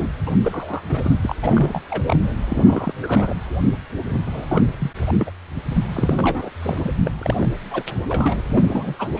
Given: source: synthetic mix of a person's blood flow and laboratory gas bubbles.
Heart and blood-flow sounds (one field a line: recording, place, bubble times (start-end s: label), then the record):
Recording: Doppler ultrasound of blood flow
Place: precordium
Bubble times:
0.00-0.10 s: bubbles
0.27-0.30 s: bubbles
0.43-1.16 s: bubbles
1.22-1.35 s: bubbles
1.43-1.82 s: bubbles
1.90-2.04 s: bubbles
2.06-2.33 s: bubbles
2.42-2.92 s: bubbles
3.03-3.33 s: bubbles
4.08-4.93 s: bubbles
5.08-5.12 s: bubbles
5.19-5.30 s: bubbles
5.93-6.50 s: bubbles
6.62-6.91 s: bubbles
7.04-7.11 s: bubbles
7.21-7.48 s: bubbles
7.71-7.83 s: bubbles
8.09-8.41 s: bubbles
8.47-8.96 s: bubbles
8.98-9.10 s: bubbles
9.15-9.20 s: bubbles
From the record:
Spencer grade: 3 (all of the cardiac periods contain showers or single bubble signals, but not dominating or overriding the cardiac motion signals)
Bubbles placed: anywhere in the cardiac cycle